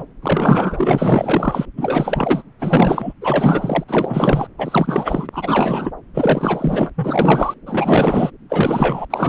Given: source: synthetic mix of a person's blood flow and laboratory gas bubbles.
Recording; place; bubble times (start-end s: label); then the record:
Doppler ultrasound of blood flow; subclavian vein
0.00-0.03 s: bubbles
0.22-1.66 s: bubbles
1.77-2.43 s: bubbles
2.59-3.14 s: bubbles
3.21-3.84 s: bubbles
3.88-4.47 s: bubbles
4.58-5.27 s: bubbles
5.32-5.91 s: bubbles
6.14-6.90 s: bubbles
6.97-7.54 s: bubbles
7.66-8.30 s: bubbles
8.49-9.05 s: bubbles
9.10-9.29 s: bubbles
From the record:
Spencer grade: 4 (maximum detectable bubble signal sounding continuously throughout systole and diastole of every cardiac period, and overriding the amplitude of the normal cardiac signals); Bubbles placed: anywhere in the cardiac cycle